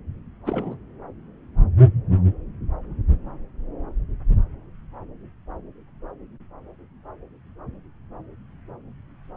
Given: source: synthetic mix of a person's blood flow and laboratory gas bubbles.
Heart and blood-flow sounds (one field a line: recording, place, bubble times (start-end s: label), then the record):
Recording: Doppler ultrasound of blood flow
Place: subclavian vein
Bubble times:
0.46-0.77 s: bubbles
From the record:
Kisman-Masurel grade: 221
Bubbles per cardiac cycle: several, 3 to 8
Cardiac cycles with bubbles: 10 to 50%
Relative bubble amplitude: barely perceptible (0.100 to 0.250)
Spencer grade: 2 (many but less than half of the cardiac periods contain bubble signals, singularly or in groups)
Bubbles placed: anywhere in the cardiac cycle